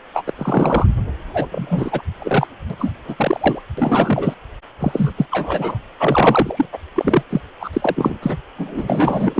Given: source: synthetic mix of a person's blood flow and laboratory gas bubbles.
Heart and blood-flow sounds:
Doppler ultrasound of blood flow; precordium
0.14-0.22 s: bubbles
0.26-0.32 s: bubbles
0.38-0.86 s: bubbles
1.33-1.46 s: bubbles
1.51-2.02 s: bubbles
2.19-2.47 s: bubbles
2.70-2.75 s: bubbles
2.79-2.92 s: bubbles
3.08-3.63 s: bubbles
3.77-4.34 s: bubbles
4.79-5.12 s: bubbles
5.16-5.26 s: bubbles
5.31-5.79 s: bubbles
5.99-6.66 s: bubbles
6.72-6.78 s: bubbles
6.96-7.22 s: bubbles
7.29-7.40 s: bubbles
7.60-7.70 s: bubbles
7.73-8.19 s: bubbles
8.22-8.38 s: bubbles
8.58-9.40 s: bubbles
From the record:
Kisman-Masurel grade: 343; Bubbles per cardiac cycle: rolling drumbeat, 9 or more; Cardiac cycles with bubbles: 100%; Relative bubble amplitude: loud (0.450 to 0.775); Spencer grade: 3 (all of the cardiac periods contain showers or single bubble signals, but not dominating or overriding the cardiac motion signals); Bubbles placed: anywhere in the cardiac cycle

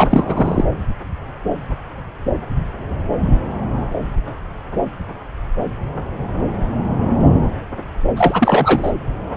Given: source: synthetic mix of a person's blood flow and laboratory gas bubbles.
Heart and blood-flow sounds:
Doppler ultrasound of blood flow; subclavian vein
0.00-0.64 s: bubbles
8.16-8.92 s: bubbles
From the record:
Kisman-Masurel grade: 223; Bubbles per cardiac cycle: several, 3 to 8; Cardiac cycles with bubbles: 10 to 50%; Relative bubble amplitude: loud (0.450 to 0.775); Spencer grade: 2 (many but less than half of the cardiac periods contain bubble signals, singularly or in groups); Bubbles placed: anywhere in the cardiac cycle

